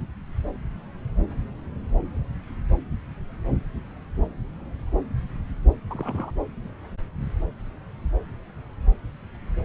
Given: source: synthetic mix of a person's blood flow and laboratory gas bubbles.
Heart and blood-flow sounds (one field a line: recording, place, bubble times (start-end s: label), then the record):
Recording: Doppler ultrasound of blood flow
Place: subclavian vein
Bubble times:
5.90-6.31 s: bubbles
From the record:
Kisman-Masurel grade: 121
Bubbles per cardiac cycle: 1 to 2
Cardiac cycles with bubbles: 10 to 50%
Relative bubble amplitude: barely perceptible (0.100 to 0.250)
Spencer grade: 2 (many but less than half of the cardiac periods contain bubble signals, singularly or in groups)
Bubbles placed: anywhere in the cardiac cycle